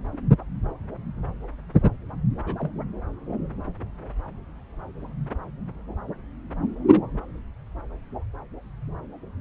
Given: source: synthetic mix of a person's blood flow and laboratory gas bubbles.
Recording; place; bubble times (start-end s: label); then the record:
Doppler ultrasound of blood flow; subclavian vein
2.46-2.54 s: bubbles
2.58-2.71 s: bubbles
6.87-7.00 s: bubbles
From the record:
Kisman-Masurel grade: 121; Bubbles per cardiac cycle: 1 to 2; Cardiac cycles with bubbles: 10 to 50%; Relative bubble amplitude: barely perceptible (0.100 to 0.250); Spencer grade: 2 (many but less than half of the cardiac periods contain bubble signals, singularly or in groups); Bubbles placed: anywhere in the cardiac cycle